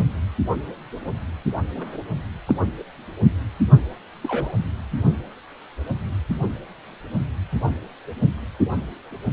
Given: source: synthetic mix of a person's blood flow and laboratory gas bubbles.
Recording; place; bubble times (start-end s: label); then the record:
Doppler ultrasound of blood flow; precordium
1.76-1.97 s: bubbles
2.46-2.54 s: bubbles
4.22-4.54 s: bubbles
From the record:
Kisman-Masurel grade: 122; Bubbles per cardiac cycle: 1 to 2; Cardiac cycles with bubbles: 10 to 50%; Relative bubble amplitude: moderate (0.250 to 0.450); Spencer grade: 2 (many but less than half of the cardiac periods contain bubble signals, singularly or in groups); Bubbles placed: anywhere in the cardiac cycle